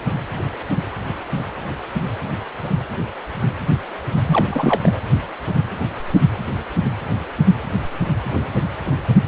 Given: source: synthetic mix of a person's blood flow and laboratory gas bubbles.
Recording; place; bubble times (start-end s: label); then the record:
Doppler ultrasound of blood flow; precordium
4.27-5.00 s: bubbles
From the record:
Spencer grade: 1 (occasional bubble signal discernible with the cardiac motion signal, with majority of cardiac periods free of bubbles); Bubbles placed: anywhere in the cardiac cycle